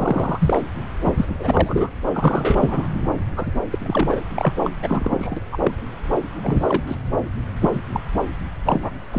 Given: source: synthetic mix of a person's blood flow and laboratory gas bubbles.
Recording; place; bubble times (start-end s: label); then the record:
Doppler ultrasound of blood flow; subclavian vein
0.00-0.61 s: bubbles
1.01-1.14 s: bubbles
1.16-1.25 s: bubbles
1.40-1.90 s: bubbles
2.13-2.89 s: bubbles
3.36-3.58 s: bubbles
3.71-4.21 s: bubbles
4.34-4.53 s: bubbles
4.64-4.70 s: bubbles
4.83-5.40 s: bubbles
5.52-5.72 s: bubbles
6.42-6.83 s: bubbles
6.87-6.96 s: bubbles
7.62-7.70 s: bubbles
7.73-7.80 s: bubbles
7.94-8.01 s: bubbles
8.65-8.90 s: bubbles
9.12-9.18 s: bubbles
From the record:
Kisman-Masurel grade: 242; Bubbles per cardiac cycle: several, 3 to 8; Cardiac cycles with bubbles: 100%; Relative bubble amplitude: moderate (0.250 to 0.450); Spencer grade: 3 (all of the cardiac periods contain showers or single bubble signals, but not dominating or overriding the cardiac motion signals); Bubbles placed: anywhere in the cardiac cycle